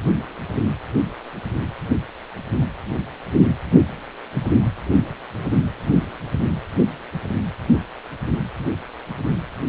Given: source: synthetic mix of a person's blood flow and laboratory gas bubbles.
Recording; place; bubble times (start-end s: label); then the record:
Doppler ultrasound of blood flow; precordium
no bubbles
From the record:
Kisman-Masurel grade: 000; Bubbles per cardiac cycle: 0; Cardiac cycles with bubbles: 0%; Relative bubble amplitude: no bubbles discernible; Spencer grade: 0 (complete lack of bubble signals)